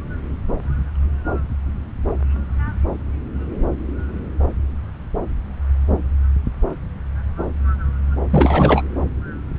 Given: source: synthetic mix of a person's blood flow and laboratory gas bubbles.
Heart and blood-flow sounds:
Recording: Doppler ultrasound of blood flow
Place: subclavian vein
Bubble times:
8.30-8.82 s: bubbles
From the record:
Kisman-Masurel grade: 213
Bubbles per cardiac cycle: several, 3 to 8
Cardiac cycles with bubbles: 1 to 10%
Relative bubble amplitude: loud (0.450 to 0.775)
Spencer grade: 1 (occasional bubble signal discernible with the cardiac motion signal, with majority of cardiac periods free of bubbles)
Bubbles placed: anywhere in the cardiac cycle

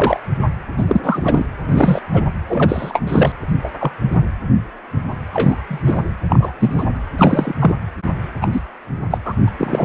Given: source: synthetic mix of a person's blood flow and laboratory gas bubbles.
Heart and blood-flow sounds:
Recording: Doppler ultrasound of blood flow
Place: precordium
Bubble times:
0.00-0.20 s: bubbles
0.78-0.85 s: bubbles
0.88-1.45 s: bubbles
1.67-2.00 s: bubbles
2.13-2.25 s: bubbles
2.48-3.01 s: bubbles
3.07-3.32 s: bubbles
3.63-3.69 s: bubbles
3.79-3.92 s: bubbles
4.11-4.21 s: bubbles
5.33-5.55 s: bubbles
5.68-6.04 s: bubbles
6.29-6.53 s: bubbles
6.59-6.84 s: bubbles
7.18-7.54 s: bubbles
7.59-7.74 s: bubbles
8.41-8.48 s: bubbles
8.53-8.61 s: bubbles
9.10-9.18 s: bubbles
9.24-9.33 s: bubbles
9.58-9.85 s: bubbles
From the record:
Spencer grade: 3 (all of the cardiac periods contain showers or single bubble signals, but not dominating or overriding the cardiac motion signals)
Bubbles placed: anywhere in the cardiac cycle

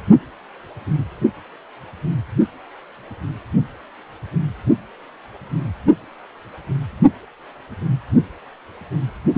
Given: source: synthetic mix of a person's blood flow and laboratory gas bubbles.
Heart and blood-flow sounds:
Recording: Doppler ultrasound of blood flow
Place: precordium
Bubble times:
9.34-9.38 s: bubbles
From the record:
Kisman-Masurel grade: 212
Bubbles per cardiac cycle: several, 3 to 8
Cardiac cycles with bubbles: 1 to 10%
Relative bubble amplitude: moderate (0.250 to 0.450)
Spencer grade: 1 (occasional bubble signal discernible with the cardiac motion signal, with majority of cardiac periods free of bubbles)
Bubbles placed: only in the low amplitude regions of the cardiac cycle

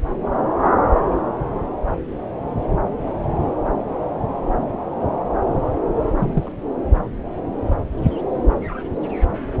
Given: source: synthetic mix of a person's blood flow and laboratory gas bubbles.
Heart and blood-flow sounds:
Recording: Doppler ultrasound of blood flow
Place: subclavian vein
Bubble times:
6.19-6.52 s: bubbles
From the record:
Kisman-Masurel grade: 112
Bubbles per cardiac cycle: 1 to 2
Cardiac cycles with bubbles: 1 to 10%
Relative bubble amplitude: moderate (0.250 to 0.450)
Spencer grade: 1 (occasional bubble signal discernible with the cardiac motion signal, with majority of cardiac periods free of bubbles)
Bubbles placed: anywhere in the cardiac cycle

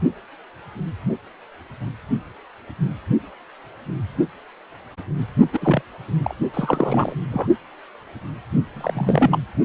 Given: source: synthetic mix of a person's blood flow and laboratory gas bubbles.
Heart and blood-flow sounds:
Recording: Doppler ultrasound of blood flow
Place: precordium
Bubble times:
5.52-5.82 s: bubbles
6.22-6.34 s: bubbles
6.54-7.15 s: bubbles
7.31-7.47 s: bubbles
8.74-9.38 s: bubbles
From the record:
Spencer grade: 2 (many but less than half of the cardiac periods contain bubble signals, singularly or in groups)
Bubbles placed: only in the low amplitude regions of the cardiac cycle

